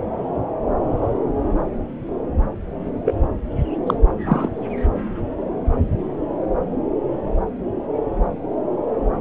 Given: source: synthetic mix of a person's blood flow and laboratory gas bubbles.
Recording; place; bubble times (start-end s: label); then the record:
Doppler ultrasound of blood flow; subclavian vein
3.04-3.15 s: bubbles
3.87-3.94 s: bubbles
4.25-4.49 s: bubbles
From the record:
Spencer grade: 1 (occasional bubble signal discernible with the cardiac motion signal, with majority of cardiac periods free of bubbles); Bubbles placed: anywhere in the cardiac cycle